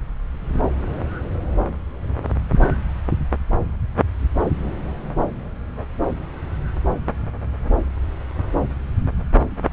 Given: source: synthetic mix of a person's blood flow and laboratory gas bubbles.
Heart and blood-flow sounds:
Doppler ultrasound of blood flow; subclavian vein
no bubbles
From the record:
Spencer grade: 0 (complete lack of bubble signals)

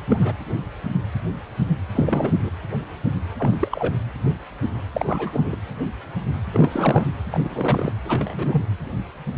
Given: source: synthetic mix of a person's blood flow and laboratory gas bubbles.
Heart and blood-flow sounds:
Doppler ultrasound of blood flow; precordium
0.00-0.02 s: bubbles
0.09-0.34 s: bubbles
1.95-2.50 s: bubbles
3.38-3.69 s: bubbles
3.71-3.96 s: bubbles
4.93-5.56 s: bubbles
6.52-7.06 s: bubbles
7.32-7.40 s: bubbles
7.44-7.93 s: bubbles
8.05-8.65 s: bubbles
From the record:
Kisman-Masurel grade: 232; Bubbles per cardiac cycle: several, 3 to 8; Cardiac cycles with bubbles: 50 to 99%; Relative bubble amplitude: moderate (0.250 to 0.450); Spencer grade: 3 (all of the cardiac periods contain showers or single bubble signals, but not dominating or overriding the cardiac motion signals); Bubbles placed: anywhere in the cardiac cycle

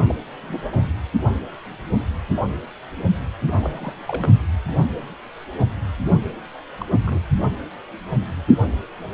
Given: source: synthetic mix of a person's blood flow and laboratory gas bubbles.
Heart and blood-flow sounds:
Doppler ultrasound of blood flow; precordium
0.00-0.16 s: bubbles
0.48-0.62 s: bubbles
0.71-0.84 s: bubbles
3.42-3.94 s: bubbles
4.07-4.33 s: bubbles
6.11-6.14 s: bubbles
6.80-6.85 s: bubbles
7.04-7.21 s: bubbles
From the record:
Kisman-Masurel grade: 221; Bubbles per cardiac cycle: several, 3 to 8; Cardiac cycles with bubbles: 10 to 50%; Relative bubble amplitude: barely perceptible (0.100 to 0.250); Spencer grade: 2 (many but less than half of the cardiac periods contain bubble signals, singularly or in groups); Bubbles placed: anywhere in the cardiac cycle

